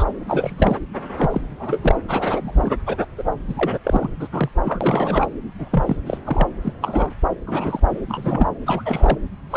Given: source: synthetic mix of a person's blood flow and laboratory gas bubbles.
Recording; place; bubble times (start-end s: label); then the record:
Doppler ultrasound of blood flow; subclavian vein
0.00-0.05 s: bubbles
0.27-0.78 s: bubbles
1.18-1.41 s: bubbles
1.44-1.79 s: bubbles
1.82-1.95 s: bubbles
2.08-2.72 s: bubbles
2.86-2.97 s: bubbles
2.99-3.05 s: bubbles
3.17-3.23 s: bubbles
3.47-3.78 s: bubbles
3.84-4.10 s: bubbles
4.20-4.28 s: bubbles
4.32-4.50 s: bubbles
4.64-5.29 s: bubbles
5.58-5.69 s: bubbles
5.71-5.96 s: bubbles
6.06-6.18 s: bubbles
6.25-6.48 s: bubbles
6.62-6.73 s: bubbles
6.81-7.14 s: bubbles
7.46-7.80 s: bubbles
8.09-8.50 s: bubbles
8.66-9.19 s: bubbles
9.50-9.56 s: bubbles
From the record:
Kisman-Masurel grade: 242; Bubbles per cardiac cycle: several, 3 to 8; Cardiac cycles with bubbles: 100%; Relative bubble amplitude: moderate (0.250 to 0.450); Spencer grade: 3 (all of the cardiac periods contain showers or single bubble signals, but not dominating or overriding the cardiac motion signals); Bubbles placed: anywhere in the cardiac cycle